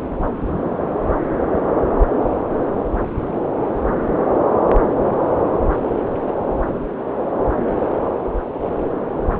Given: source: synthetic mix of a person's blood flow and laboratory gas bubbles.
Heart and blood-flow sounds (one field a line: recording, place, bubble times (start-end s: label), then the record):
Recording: Doppler ultrasound of blood flow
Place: subclavian vein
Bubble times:
6.27-6.32 s: bubbles
From the record:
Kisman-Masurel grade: 112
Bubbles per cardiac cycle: 1 to 2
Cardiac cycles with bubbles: 1 to 10%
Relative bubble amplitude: moderate (0.250 to 0.450)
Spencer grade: 1 (occasional bubble signal discernible with the cardiac motion signal, with majority of cardiac periods free of bubbles)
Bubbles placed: anywhere in the cardiac cycle